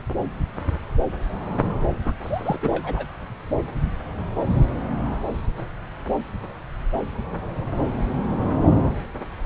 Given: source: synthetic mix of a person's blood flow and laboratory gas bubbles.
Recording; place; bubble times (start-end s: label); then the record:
Doppler ultrasound of blood flow; subclavian vein
2.04-2.13 s: bubbles
2.23-2.58 s: bubbles
2.62-3.06 s: bubbles
From the record:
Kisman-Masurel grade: 211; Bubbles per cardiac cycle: several, 3 to 8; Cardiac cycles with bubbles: 1 to 10%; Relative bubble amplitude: barely perceptible (0.100 to 0.250); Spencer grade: 1 (occasional bubble signal discernible with the cardiac motion signal, with majority of cardiac periods free of bubbles); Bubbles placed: anywhere in the cardiac cycle